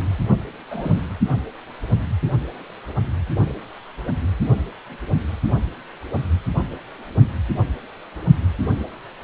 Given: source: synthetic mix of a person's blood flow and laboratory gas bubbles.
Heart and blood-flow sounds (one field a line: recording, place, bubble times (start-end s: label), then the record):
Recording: Doppler ultrasound of blood flow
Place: precordium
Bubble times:
0.70-1.02 s: bubbles
From the record:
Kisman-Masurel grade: 112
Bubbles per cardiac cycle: 1 to 2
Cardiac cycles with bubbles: 1 to 10%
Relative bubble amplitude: moderate (0.250 to 0.450)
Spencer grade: 1 (occasional bubble signal discernible with the cardiac motion signal, with majority of cardiac periods free of bubbles)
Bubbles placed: only in the low amplitude regions of the cardiac cycle